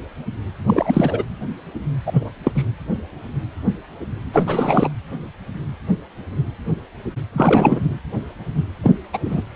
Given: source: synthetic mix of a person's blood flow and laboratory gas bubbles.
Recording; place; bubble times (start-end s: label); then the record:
Doppler ultrasound of blood flow; precordium
0.67-1.23 s: bubbles
2.06-2.29 s: bubbles
2.44-2.52 s: bubbles
2.55-2.63 s: bubbles
4.33-4.92 s: bubbles
7.33-7.80 s: bubbles
8.83-8.93 s: bubbles
9.13-9.19 s: bubbles
9.25-9.41 s: bubbles
From the record:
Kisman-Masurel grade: 223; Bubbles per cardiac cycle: several, 3 to 8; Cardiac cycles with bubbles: 10 to 50%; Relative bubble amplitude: loud (0.450 to 0.775); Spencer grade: 2 (many but less than half of the cardiac periods contain bubble signals, singularly or in groups); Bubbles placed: anywhere in the cardiac cycle